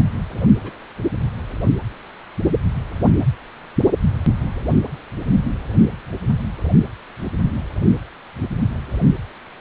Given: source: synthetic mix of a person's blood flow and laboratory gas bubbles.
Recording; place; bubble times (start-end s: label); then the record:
Doppler ultrasound of blood flow; precordium
0.61-0.78 s: bubbles
From the record:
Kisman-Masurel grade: 111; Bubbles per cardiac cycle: 1 to 2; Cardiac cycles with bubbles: 1 to 10%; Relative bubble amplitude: barely perceptible (0.100 to 0.250); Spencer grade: 1 (occasional bubble signal discernible with the cardiac motion signal, with majority of cardiac periods free of bubbles); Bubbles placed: anywhere in the cardiac cycle